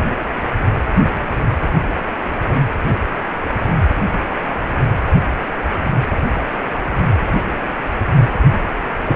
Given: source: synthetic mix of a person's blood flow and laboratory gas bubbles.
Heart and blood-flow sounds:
Doppler ultrasound of blood flow; precordium
9.05-9.16 s: bubbles
From the record:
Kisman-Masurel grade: 112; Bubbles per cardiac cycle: 1 to 2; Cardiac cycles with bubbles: 1 to 10%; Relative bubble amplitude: moderate (0.250 to 0.450); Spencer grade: 1 (occasional bubble signal discernible with the cardiac motion signal, with majority of cardiac periods free of bubbles); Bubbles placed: anywhere in the cardiac cycle

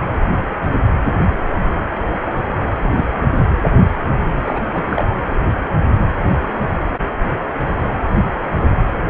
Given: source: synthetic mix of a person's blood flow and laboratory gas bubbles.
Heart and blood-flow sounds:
Doppler ultrasound of blood flow; precordium
2.48-2.64 s: bubbles
2.81-3.04 s: bubbles
4.45-4.67 s: bubbles
4.73-5.05 s: bubbles
From the record:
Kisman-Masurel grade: 222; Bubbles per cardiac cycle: several, 3 to 8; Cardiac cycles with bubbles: 10 to 50%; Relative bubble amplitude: moderate (0.250 to 0.450); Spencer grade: 2 (many but less than half of the cardiac periods contain bubble signals, singularly or in groups); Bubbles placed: anywhere in the cardiac cycle

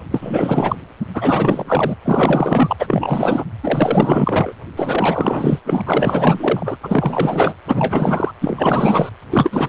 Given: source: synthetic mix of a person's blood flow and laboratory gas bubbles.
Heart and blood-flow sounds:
Doppler ultrasound of blood flow; precordium
0.11-0.76 s: bubbles
1.14-1.96 s: bubbles
2.04-2.77 s: bubbles
2.79-3.44 s: bubbles
3.63-4.53 s: bubbles
4.76-5.59 s: bubbles
5.65-5.82 s: bubbles
5.86-6.76 s: bubbles
6.83-7.54 s: bubbles
7.67-8.31 s: bubbles
8.40-9.09 s: bubbles
9.30-9.69 s: bubbles
From the record:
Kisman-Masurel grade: 444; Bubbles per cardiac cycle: continuous sound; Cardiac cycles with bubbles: 100%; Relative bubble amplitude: maximal (0.775 to 0.999); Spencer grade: 4 (maximum detectable bubble signal sounding continuously throughout systole and diastole of every cardiac period, and overriding the amplitude of the normal cardiac signals); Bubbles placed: anywhere in the cardiac cycle

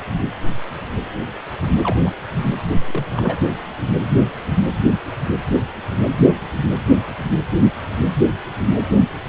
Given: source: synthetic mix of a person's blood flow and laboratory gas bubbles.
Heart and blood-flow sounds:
Doppler ultrasound of blood flow; precordium
1.83-2.14 s: bubbles
2.72-3.06 s: bubbles
3.09-3.44 s: bubbles
From the record:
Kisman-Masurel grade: 222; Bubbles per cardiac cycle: several, 3 to 8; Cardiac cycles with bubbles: 10 to 50%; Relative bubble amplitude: moderate (0.250 to 0.450); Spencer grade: 2 (many but less than half of the cardiac periods contain bubble signals, singularly or in groups); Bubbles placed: anywhere in the cardiac cycle

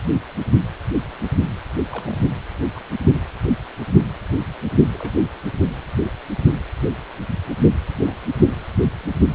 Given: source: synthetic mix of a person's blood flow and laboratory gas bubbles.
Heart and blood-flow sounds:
Doppler ultrasound of blood flow; precordium
0.28-0.31 s: bubbles
1.90-2.16 s: bubbles
2.75-2.80 s: bubbles
3.15-3.19 s: bubbles
4.93-5.17 s: bubbles
7.58-7.63 s: bubbles
7.99-8.18 s: bubbles
From the record:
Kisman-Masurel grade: 121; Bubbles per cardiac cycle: 1 to 2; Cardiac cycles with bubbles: 10 to 50%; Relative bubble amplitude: barely perceptible (0.100 to 0.250); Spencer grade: 2 (many but less than half of the cardiac periods contain bubble signals, singularly or in groups); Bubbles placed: only in the low amplitude regions of the cardiac cycle

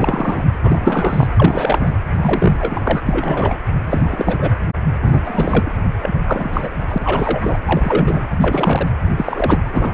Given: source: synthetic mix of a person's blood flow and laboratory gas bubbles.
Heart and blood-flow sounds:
Doppler ultrasound of blood flow; precordium
0.00-0.44 s: bubbles
0.63-1.27 s: bubbles
1.36-1.94 s: bubbles
2.19-2.57 s: bubbles
2.59-3.02 s: bubbles
3.06-3.57 s: bubbles
3.84-4.51 s: bubbles
5.02-5.72 s: bubbles
6.02-6.23 s: bubbles
6.25-6.69 s: bubbles
6.88-7.58 s: bubbles
7.64-8.22 s: bubbles
8.40-8.87 s: bubbles
9.17-9.58 s: bubbles
9.73-9.94 s: bubbles
From the record:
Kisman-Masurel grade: 342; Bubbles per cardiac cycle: rolling drumbeat, 9 or more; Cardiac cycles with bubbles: 100%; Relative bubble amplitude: moderate (0.250 to 0.450); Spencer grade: 3 (all of the cardiac periods contain showers or single bubble signals, but not dominating or overriding the cardiac motion signals); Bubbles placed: anywhere in the cardiac cycle

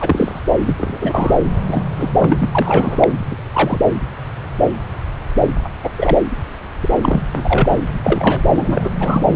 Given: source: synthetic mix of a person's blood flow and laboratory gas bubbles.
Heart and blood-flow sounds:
Doppler ultrasound of blood flow; subclavian vein
0.00-0.41 s: bubbles
0.65-0.75 s: bubbles
0.79-0.98 s: bubbles
1.01-1.34 s: bubbles
1.67-1.82 s: bubbles
1.97-2.09 s: bubbles
2.19-3.13 s: bubbles
3.30-3.35 s: bubbles
3.52-3.80 s: bubbles
5.64-5.69 s: bubbles
5.83-5.91 s: bubbles
5.98-6.17 s: bubbles
7.02-7.21 s: bubbles
7.33-7.68 s: bubbles
7.71-7.80 s: bubbles
8.04-8.41 s: bubbles
8.54-8.90 s: bubbles
8.99-9.21 s: bubbles
From the record:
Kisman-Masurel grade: 233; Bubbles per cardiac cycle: several, 3 to 8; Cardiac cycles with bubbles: 50 to 99%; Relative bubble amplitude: loud (0.450 to 0.775); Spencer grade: 3 (all of the cardiac periods contain showers or single bubble signals, but not dominating or overriding the cardiac motion signals); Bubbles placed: anywhere in the cardiac cycle

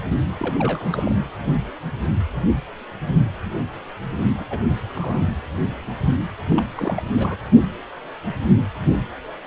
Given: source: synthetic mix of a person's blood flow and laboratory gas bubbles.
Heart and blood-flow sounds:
Doppler ultrasound of blood flow; precordium
0.38-0.54 s: bubbles
0.58-1.16 s: bubbles
4.39-4.44 s: bubbles
4.50-4.60 s: bubbles
4.95-5.23 s: bubbles
6.48-6.61 s: bubbles
6.76-7.03 s: bubbles
7.16-7.36 s: bubbles
From the record:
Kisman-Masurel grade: 221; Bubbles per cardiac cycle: several, 3 to 8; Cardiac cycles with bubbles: 10 to 50%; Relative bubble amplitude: barely perceptible (0.100 to 0.250); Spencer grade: 2 (many but less than half of the cardiac periods contain bubble signals, singularly or in groups); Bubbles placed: anywhere in the cardiac cycle

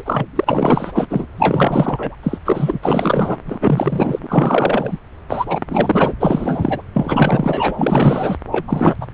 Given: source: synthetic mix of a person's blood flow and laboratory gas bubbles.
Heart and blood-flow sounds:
Doppler ultrasound of blood flow; subclavian vein
0.00-0.26 s: bubbles
0.36-0.92 s: bubbles
0.95-1.07 s: bubbles
1.09-1.26 s: bubbles
1.38-2.16 s: bubbles
2.23-2.38 s: bubbles
2.45-2.79 s: bubbles
2.82-3.37 s: bubbles
3.46-4.19 s: bubbles
4.22-4.97 s: bubbles
5.29-5.60 s: bubbles
5.67-6.13 s: bubbles
6.19-6.82 s: bubbles
6.93-8.37 s: bubbles
8.51-8.64 s: bubbles
8.67-8.96 s: bubbles
9.00-9.06 s: bubbles
From the record:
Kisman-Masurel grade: 444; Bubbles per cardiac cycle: continuous sound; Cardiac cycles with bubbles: 100%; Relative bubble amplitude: maximal (0.775 to 0.999); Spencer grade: 4 (maximum detectable bubble signal sounding continuously throughout systole and diastole of every cardiac period, and overriding the amplitude of the normal cardiac signals); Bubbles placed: anywhere in the cardiac cycle

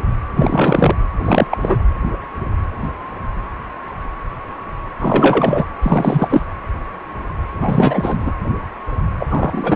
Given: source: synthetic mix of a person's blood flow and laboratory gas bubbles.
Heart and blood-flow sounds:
Doppler ultrasound of blood flow; precordium
0.36-0.95 s: bubbles
1.24-1.46 s: bubbles
1.50-1.78 s: bubbles
4.99-5.65 s: bubbles
5.82-6.42 s: bubbles
7.53-8.33 s: bubbles
9.19-9.26 s: bubbles
9.30-9.76 s: bubbles
From the record:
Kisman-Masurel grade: 333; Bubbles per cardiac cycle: rolling drumbeat, 9 or more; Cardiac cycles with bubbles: 50 to 99%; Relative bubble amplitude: loud (0.450 to 0.775); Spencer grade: 3 (all of the cardiac periods contain showers or single bubble signals, but not dominating or overriding the cardiac motion signals); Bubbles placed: anywhere in the cardiac cycle

